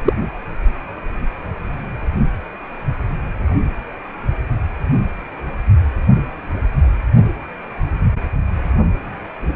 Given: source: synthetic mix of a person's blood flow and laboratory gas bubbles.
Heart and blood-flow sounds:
Doppler ultrasound of blood flow; precordium
0.04-0.13 s: bubbles
From the record:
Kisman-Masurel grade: 113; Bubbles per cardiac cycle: 1 to 2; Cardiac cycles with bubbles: 1 to 10%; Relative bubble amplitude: loud (0.450 to 0.775); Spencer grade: 1 (occasional bubble signal discernible with the cardiac motion signal, with majority of cardiac periods free of bubbles); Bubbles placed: only in the low amplitude regions of the cardiac cycle

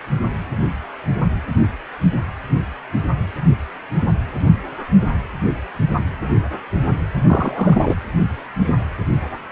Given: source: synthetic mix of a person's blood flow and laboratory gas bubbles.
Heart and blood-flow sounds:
Doppler ultrasound of blood flow; precordium
7.27-7.96 s: bubbles
From the record:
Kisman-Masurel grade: 213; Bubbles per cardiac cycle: several, 3 to 8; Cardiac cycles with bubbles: 1 to 10%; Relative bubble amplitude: loud (0.450 to 0.775); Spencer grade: 1 (occasional bubble signal discernible with the cardiac motion signal, with majority of cardiac periods free of bubbles); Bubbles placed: anywhere in the cardiac cycle

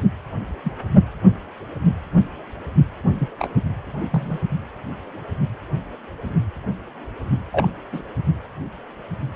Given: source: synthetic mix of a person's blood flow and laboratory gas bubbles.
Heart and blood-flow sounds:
Doppler ultrasound of blood flow; precordium
0.64-0.71 s: bubbles
3.20-3.29 s: bubbles
3.38-3.51 s: bubbles
4.10-4.39 s: bubbles
7.52-7.67 s: bubbles
7.92-8.03 s: bubbles
From the record:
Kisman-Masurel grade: 122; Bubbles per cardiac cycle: 1 to 2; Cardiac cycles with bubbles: 10 to 50%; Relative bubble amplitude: moderate (0.250 to 0.450); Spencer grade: 2 (many but less than half of the cardiac periods contain bubble signals, singularly or in groups); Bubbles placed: anywhere in the cardiac cycle

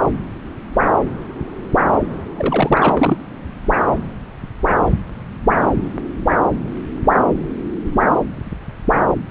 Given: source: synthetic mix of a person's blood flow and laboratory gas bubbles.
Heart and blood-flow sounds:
Doppler ultrasound of blood flow; subclavian vein
2.37-3.17 s: bubbles
From the record:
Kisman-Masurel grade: 212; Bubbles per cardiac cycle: several, 3 to 8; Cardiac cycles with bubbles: 1 to 10%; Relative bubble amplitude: moderate (0.250 to 0.450); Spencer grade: 1 (occasional bubble signal discernible with the cardiac motion signal, with majority of cardiac periods free of bubbles); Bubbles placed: anywhere in the cardiac cycle

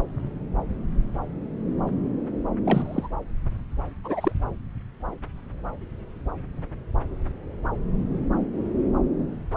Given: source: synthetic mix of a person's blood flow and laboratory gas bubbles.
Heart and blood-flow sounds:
Doppler ultrasound of blood flow; subclavian vein
2.65-3.08 s: bubbles
4.04-4.32 s: bubbles
From the record:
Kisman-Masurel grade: 221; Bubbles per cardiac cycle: several, 3 to 8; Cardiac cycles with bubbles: 10 to 50%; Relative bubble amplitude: barely perceptible (0.100 to 0.250); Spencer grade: 2 (many but less than half of the cardiac periods contain bubble signals, singularly or in groups); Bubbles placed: anywhere in the cardiac cycle

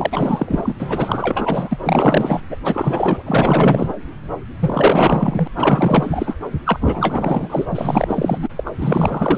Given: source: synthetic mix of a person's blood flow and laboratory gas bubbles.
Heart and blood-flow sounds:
Doppler ultrasound of blood flow; subclavian vein
0.00-0.74 s: bubbles
0.80-1.78 s: bubbles
1.83-2.40 s: bubbles
2.49-2.56 s: bubbles
2.64-3.22 s: bubbles
3.26-3.93 s: bubbles
4.60-5.48 s: bubbles
5.56-6.35 s: bubbles
6.64-7.66 s: bubbles
7.75-8.38 s: bubbles
8.42-8.48 s: bubbles
8.55-8.70 s: bubbles
8.80-9.38 s: bubbles
From the record:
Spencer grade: 4 (maximum detectable bubble signal sounding continuously throughout systole and diastole of every cardiac period, and overriding the amplitude of the normal cardiac signals); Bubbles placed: anywhere in the cardiac cycle

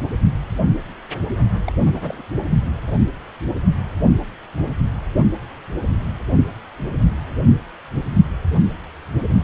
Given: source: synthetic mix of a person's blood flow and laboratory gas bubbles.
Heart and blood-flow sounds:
Doppler ultrasound of blood flow; precordium
1.67-1.72 s: bubbles
1.85-2.21 s: bubbles
From the record:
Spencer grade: 1 (occasional bubble signal discernible with the cardiac motion signal, with majority of cardiac periods free of bubbles); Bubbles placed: only in the low amplitude regions of the cardiac cycle

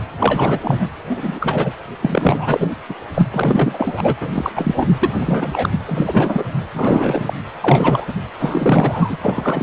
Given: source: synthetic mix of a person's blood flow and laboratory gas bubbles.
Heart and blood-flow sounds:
Doppler ultrasound of blood flow; precordium
0.00-0.03 s: bubbles
0.18-0.89 s: bubbles
1.09-1.73 s: bubbles
2.01-2.71 s: bubbles
2.89-2.95 s: bubbles
3.14-3.26 s: bubbles
3.30-4.15 s: bubbles
4.21-4.52 s: bubbles
4.56-4.88 s: bubbles
5.00-5.72 s: bubbles
5.86-6.44 s: bubbles
6.74-7.33 s: bubbles
7.62-8.14 s: bubbles
8.39-9.18 s: bubbles
9.22-9.63 s: bubbles
From the record:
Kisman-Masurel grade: 343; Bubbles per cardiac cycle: rolling drumbeat, 9 or more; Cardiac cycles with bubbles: 100%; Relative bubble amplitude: loud (0.450 to 0.775); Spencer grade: 3 (all of the cardiac periods contain showers or single bubble signals, but not dominating or overriding the cardiac motion signals); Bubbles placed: anywhere in the cardiac cycle

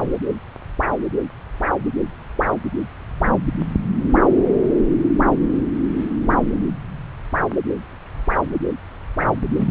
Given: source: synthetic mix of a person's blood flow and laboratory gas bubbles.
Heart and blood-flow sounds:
Doppler ultrasound of blood flow; subclavian vein
9.56-9.71 s: bubbles
From the record:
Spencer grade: 1 (occasional bubble signal discernible with the cardiac motion signal, with majority of cardiac periods free of bubbles); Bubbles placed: anywhere in the cardiac cycle

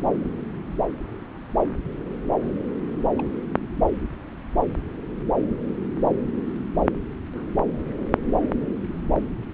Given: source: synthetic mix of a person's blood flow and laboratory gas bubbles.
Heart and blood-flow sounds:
Doppler ultrasound of blood flow; subclavian vein
3.19-3.27 s: bubbles
From the record:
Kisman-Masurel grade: 111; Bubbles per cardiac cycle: 1 to 2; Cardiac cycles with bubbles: 1 to 10%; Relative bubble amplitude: barely perceptible (0.100 to 0.250); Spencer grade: 1 (occasional bubble signal discernible with the cardiac motion signal, with majority of cardiac periods free of bubbles); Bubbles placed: anywhere in the cardiac cycle

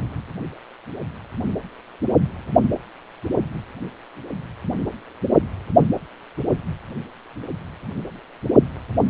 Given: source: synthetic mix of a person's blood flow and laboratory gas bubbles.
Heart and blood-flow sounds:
Doppler ultrasound of blood flow; precordium
no bubbles
From the record:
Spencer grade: 0 (complete lack of bubble signals)

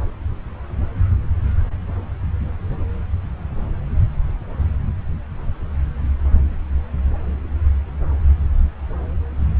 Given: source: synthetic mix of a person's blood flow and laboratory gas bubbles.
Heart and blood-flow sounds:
Doppler ultrasound of blood flow; subclavian vein
no bubbles
From the record:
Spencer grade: 0 (complete lack of bubble signals)

